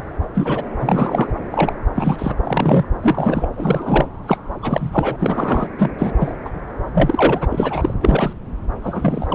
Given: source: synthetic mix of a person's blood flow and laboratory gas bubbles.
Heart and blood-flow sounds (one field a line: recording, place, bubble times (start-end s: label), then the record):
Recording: Doppler ultrasound of blood flow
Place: subclavian vein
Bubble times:
0.00-0.03 s: bubbles
0.34-0.69 s: bubbles
0.79-1.29 s: bubbles
1.50-1.75 s: bubbles
1.94-2.35 s: bubbles
2.44-2.85 s: bubbles
3.02-3.48 s: bubbles
3.57-4.07 s: bubbles
4.26-4.38 s: bubbles
4.62-5.67 s: bubbles
5.78-5.92 s: bubbles
5.98-6.12 s: bubbles
6.20-6.36 s: bubbles
6.45-6.50 s: bubbles
6.93-7.94 s: bubbles
8.01-8.33 s: bubbles
8.83-9.35 s: bubbles
From the record:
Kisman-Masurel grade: 242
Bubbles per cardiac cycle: several, 3 to 8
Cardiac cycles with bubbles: 100%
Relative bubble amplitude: moderate (0.250 to 0.450)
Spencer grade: 3 (all of the cardiac periods contain showers or single bubble signals, but not dominating or overriding the cardiac motion signals)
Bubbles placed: anywhere in the cardiac cycle